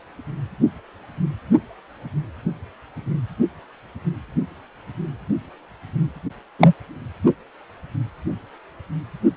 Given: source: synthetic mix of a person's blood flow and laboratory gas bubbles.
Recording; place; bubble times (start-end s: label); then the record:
Doppler ultrasound of blood flow; precordium
6.59-6.73 s: bubbles
From the record:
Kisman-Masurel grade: 113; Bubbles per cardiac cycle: 1 to 2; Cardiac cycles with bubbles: 1 to 10%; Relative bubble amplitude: loud (0.450 to 0.775); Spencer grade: 1 (occasional bubble signal discernible with the cardiac motion signal, with majority of cardiac periods free of bubbles); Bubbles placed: only in the low amplitude regions of the cardiac cycle